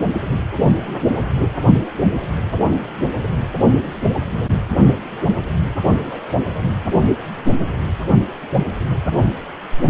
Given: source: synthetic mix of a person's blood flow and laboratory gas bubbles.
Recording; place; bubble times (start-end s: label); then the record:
Doppler ultrasound of blood flow; precordium
6.11-6.36 s: bubbles
From the record:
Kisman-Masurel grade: 121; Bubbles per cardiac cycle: 1 to 2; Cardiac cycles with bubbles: 10 to 50%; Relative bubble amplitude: barely perceptible (0.100 to 0.250); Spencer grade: 2 (many but less than half of the cardiac periods contain bubble signals, singularly or in groups); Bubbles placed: only in the low amplitude regions of the cardiac cycle